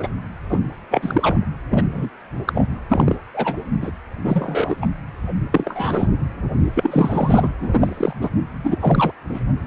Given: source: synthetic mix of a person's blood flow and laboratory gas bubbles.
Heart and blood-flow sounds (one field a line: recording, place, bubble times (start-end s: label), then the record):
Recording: Doppler ultrasound of blood flow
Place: precordium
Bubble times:
0.00-0.11 s: bubbles
0.49-0.58 s: bubbles
0.90-1.45 s: bubbles
1.71-2.08 s: bubbles
2.47-2.68 s: bubbles
2.89-3.16 s: bubbles
3.33-3.58 s: bubbles
3.81-3.90 s: bubbles
4.24-4.75 s: bubbles
4.81-4.85 s: bubbles
5.51-6.07 s: bubbles
6.73-7.52 s: bubbles
7.60-8.13 s: bubbles
8.21-8.30 s: bubbles
8.63-8.77 s: bubbles
8.79-9.12 s: bubbles
9.33-9.40 s: bubbles
From the record:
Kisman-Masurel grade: 242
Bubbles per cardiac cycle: several, 3 to 8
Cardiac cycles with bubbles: 100%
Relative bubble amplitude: moderate (0.250 to 0.450)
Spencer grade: 3 (all of the cardiac periods contain showers or single bubble signals, but not dominating or overriding the cardiac motion signals)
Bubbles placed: anywhere in the cardiac cycle